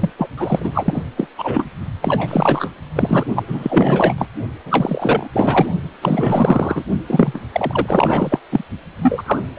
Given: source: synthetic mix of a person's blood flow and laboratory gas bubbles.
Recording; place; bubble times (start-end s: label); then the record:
Doppler ultrasound of blood flow; precordium
0.00-0.10 s: bubbles
0.17-0.28 s: bubbles
0.38-1.05 s: bubbles
1.17-1.28 s: bubbles
1.38-1.68 s: bubbles
2.02-2.71 s: bubbles
2.95-3.25 s: bubbles
3.35-3.43 s: bubbles
3.47-4.14 s: bubbles
4.17-4.25 s: bubbles
4.66-5.28 s: bubbles
5.33-5.66 s: bubbles
6.01-6.84 s: bubbles
7.07-7.42 s: bubbles
7.52-8.39 s: bubbles
8.51-8.64 s: bubbles
9.02-9.22 s: bubbles
9.26-9.39 s: bubbles
9.56-9.59 s: bubbles
From the record:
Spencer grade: 4 (maximum detectable bubble signal sounding continuously throughout systole and diastole of every cardiac period, and overriding the amplitude of the normal cardiac signals); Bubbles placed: only in the low amplitude regions of the cardiac cycle